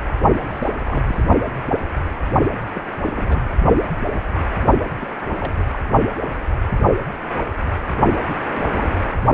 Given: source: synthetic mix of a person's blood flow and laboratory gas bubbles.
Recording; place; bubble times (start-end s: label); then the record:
Doppler ultrasound of blood flow; precordium
0.41-1.03 s: bubbles
1.06-1.24 s: bubbles
2.74-2.81 s: bubbles
3.06-3.45 s: bubbles
4.81-4.85 s: bubbles
5.02-5.08 s: bubbles
5.40-5.54 s: bubbles
5.57-5.64 s: bubbles
5.72-5.82 s: bubbles
8.29-8.35 s: bubbles
8.53-8.92 s: bubbles
From the record:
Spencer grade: 2 (many but less than half of the cardiac periods contain bubble signals, singularly or in groups); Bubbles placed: only in the low amplitude regions of the cardiac cycle